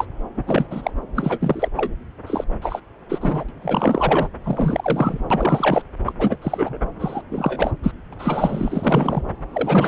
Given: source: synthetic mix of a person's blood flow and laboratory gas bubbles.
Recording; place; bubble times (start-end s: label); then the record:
Doppler ultrasound of blood flow; subclavian vein
0.00-0.07 s: bubbles
0.36-0.44 s: bubbles
0.47-0.66 s: bubbles
0.71-0.91 s: bubbles
1.15-1.69 s: bubbles
1.76-1.91 s: bubbles
2.27-2.44 s: bubbles
2.62-2.81 s: bubbles
3.09-3.44 s: bubbles
3.49-3.51 s: bubbles
3.62-4.28 s: bubbles
4.44-5.24 s: bubbles
5.30-5.82 s: bubbles
6.05-6.13 s: bubbles
6.18-6.37 s: bubbles
6.42-6.78 s: bubbles
6.99-7.23 s: bubbles
7.30-7.71 s: bubbles
7.83-7.92 s: bubbles
8.12-9.22 s: bubbles
9.51-9.88 s: bubbles
From the record:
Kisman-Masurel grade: 343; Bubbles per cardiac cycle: rolling drumbeat, 9 or more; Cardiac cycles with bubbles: 100%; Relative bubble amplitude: loud (0.450 to 0.775); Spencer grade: 3 (all of the cardiac periods contain showers or single bubble signals, but not dominating or overriding the cardiac motion signals); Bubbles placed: anywhere in the cardiac cycle